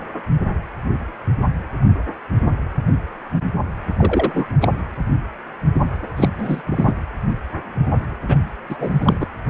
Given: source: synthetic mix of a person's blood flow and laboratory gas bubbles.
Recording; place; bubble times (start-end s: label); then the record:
Doppler ultrasound of blood flow; precordium
3.97-4.58 s: bubbles
4.61-4.68 s: bubbles
6.17-6.29 s: bubbles
6.38-6.61 s: bubbles
6.67-6.92 s: bubbles
8.27-8.36 s: bubbles
8.70-8.76 s: bubbles
8.79-9.27 s: bubbles
From the record:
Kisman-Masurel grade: 222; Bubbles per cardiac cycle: several, 3 to 8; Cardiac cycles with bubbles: 10 to 50%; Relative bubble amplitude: moderate (0.250 to 0.450); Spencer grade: 2 (many but less than half of the cardiac periods contain bubble signals, singularly or in groups); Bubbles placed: anywhere in the cardiac cycle